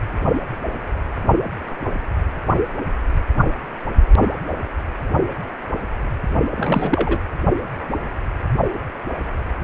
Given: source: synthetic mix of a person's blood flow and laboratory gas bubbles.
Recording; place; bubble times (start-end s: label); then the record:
Doppler ultrasound of blood flow; precordium
6.55-7.20 s: bubbles
From the record:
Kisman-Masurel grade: 213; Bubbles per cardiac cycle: several, 3 to 8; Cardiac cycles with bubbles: 1 to 10%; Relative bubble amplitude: loud (0.450 to 0.775); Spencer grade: 1 (occasional bubble signal discernible with the cardiac motion signal, with majority of cardiac periods free of bubbles); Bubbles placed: only in the low amplitude regions of the cardiac cycle